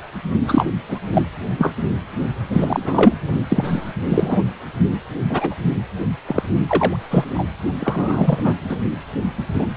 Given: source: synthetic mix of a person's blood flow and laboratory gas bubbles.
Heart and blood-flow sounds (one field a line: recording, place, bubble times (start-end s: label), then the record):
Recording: Doppler ultrasound of blood flow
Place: precordium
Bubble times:
0.47-0.64 s: bubbles
0.88-0.98 s: bubbles
1.13-1.22 s: bubbles
1.58-1.73 s: bubbles
2.21-2.27 s: bubbles
2.53-3.13 s: bubbles
3.48-3.92 s: bubbles
4.09-4.42 s: bubbles
5.29-5.56 s: bubbles
6.26-6.43 s: bubbles
6.67-6.96 s: bubbles
7.10-7.25 s: bubbles
7.34-7.45 s: bubbles
7.80-8.54 s: bubbles
8.69-8.77 s: bubbles
9.54-9.67 s: bubbles
From the record:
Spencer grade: 3 (all of the cardiac periods contain showers or single bubble signals, but not dominating or overriding the cardiac motion signals)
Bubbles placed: only in the low amplitude regions of the cardiac cycle